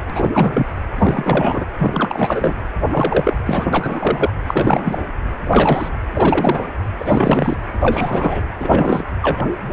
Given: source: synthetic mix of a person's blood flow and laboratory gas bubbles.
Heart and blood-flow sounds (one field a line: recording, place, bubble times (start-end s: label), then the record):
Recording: Doppler ultrasound of blood flow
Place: precordium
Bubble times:
0.10-0.66 s: bubbles
0.99-1.65 s: bubbles
1.79-2.54 s: bubbles
2.91-3.37 s: bubbles
3.46-3.66 s: bubbles
3.73-4.29 s: bubbles
4.46-4.98 s: bubbles
5.43-5.98 s: bubbles
6.14-6.71 s: bubbles
6.98-7.56 s: bubbles
7.79-8.42 s: bubbles
8.60-9.05 s: bubbles
9.21-9.47 s: bubbles
From the record:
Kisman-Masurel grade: 343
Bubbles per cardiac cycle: rolling drumbeat, 9 or more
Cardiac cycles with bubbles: 100%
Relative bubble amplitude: loud (0.450 to 0.775)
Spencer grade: 3 (all of the cardiac periods contain showers or single bubble signals, but not dominating or overriding the cardiac motion signals)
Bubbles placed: anywhere in the cardiac cycle